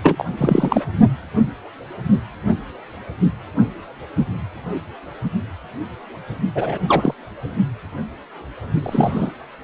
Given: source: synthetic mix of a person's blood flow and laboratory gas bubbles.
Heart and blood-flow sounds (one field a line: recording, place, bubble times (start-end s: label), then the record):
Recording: Doppler ultrasound of blood flow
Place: precordium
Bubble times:
0.02-0.25 s: bubbles
0.38-0.84 s: bubbles
6.55-6.78 s: bubbles
6.88-7.14 s: bubbles
8.83-9.31 s: bubbles
From the record:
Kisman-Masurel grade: 223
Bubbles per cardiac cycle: several, 3 to 8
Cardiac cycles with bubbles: 10 to 50%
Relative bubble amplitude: loud (0.450 to 0.775)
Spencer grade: 2 (many but less than half of the cardiac periods contain bubble signals, singularly or in groups)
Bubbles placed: only in the low amplitude regions of the cardiac cycle